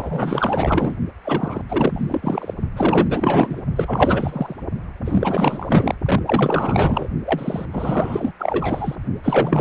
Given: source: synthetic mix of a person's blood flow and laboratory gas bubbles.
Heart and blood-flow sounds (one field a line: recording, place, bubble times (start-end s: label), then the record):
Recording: Doppler ultrasound of blood flow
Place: precordium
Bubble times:
0.00-0.95 s: bubbles
1.22-1.61 s: bubbles
1.69-2.54 s: bubbles
2.76-3.62 s: bubbles
3.75-4.56 s: bubbles
5.04-5.95 s: bubbles
6.05-6.23 s: bubbles
6.25-7.08 s: bubbles
7.25-7.66 s: bubbles
7.71-8.32 s: bubbles
8.39-8.96 s: bubbles
9.23-9.61 s: bubbles
From the record:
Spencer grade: 4 (maximum detectable bubble signal sounding continuously throughout systole and diastole of every cardiac period, and overriding the amplitude of the normal cardiac signals)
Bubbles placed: only in the low amplitude regions of the cardiac cycle